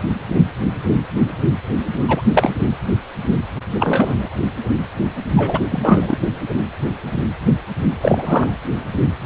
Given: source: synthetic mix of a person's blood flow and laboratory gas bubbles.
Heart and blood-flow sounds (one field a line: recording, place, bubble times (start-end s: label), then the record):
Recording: Doppler ultrasound of blood flow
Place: precordium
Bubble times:
2.08-2.21 s: bubbles
2.32-2.54 s: bubbles
3.79-4.29 s: bubbles
5.36-5.60 s: bubbles
5.71-6.17 s: bubbles
8.01-8.50 s: bubbles
From the record:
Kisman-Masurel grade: 223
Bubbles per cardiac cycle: several, 3 to 8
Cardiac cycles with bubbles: 10 to 50%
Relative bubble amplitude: loud (0.450 to 0.775)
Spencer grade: 2 (many but less than half of the cardiac periods contain bubble signals, singularly or in groups)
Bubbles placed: anywhere in the cardiac cycle